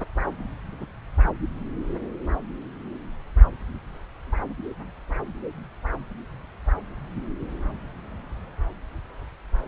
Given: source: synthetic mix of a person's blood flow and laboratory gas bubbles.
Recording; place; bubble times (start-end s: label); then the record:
Doppler ultrasound of blood flow; subclavian vein
0.72-0.85 s: bubbles
From the record:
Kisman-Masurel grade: 111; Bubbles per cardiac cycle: 1 to 2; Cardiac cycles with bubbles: 1 to 10%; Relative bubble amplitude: barely perceptible (0.100 to 0.250); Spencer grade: 1 (occasional bubble signal discernible with the cardiac motion signal, with majority of cardiac periods free of bubbles); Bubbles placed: anywhere in the cardiac cycle